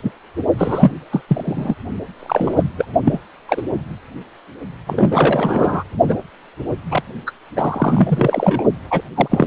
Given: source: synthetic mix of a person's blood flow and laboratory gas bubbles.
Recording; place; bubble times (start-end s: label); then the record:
Doppler ultrasound of blood flow; precordium
0.03-0.12 s: bubbles
0.58-0.91 s: bubbles
1.12-1.23 s: bubbles
1.28-1.74 s: bubbles
2.19-2.65 s: bubbles
2.77-2.85 s: bubbles
3.04-3.20 s: bubbles
3.48-3.62 s: bubbles
4.87-5.83 s: bubbles
6.07-6.17 s: bubbles
6.91-7.03 s: bubbles
7.27-7.31 s: bubbles
7.56-8.64 s: bubbles
8.90-9.02 s: bubbles
9.15-9.47 s: bubbles
From the record:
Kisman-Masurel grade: 243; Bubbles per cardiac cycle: several, 3 to 8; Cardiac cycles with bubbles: 100%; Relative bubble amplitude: loud (0.450 to 0.775); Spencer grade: 3 (all of the cardiac periods contain showers or single bubble signals, but not dominating or overriding the cardiac motion signals); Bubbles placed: only in the low amplitude regions of the cardiac cycle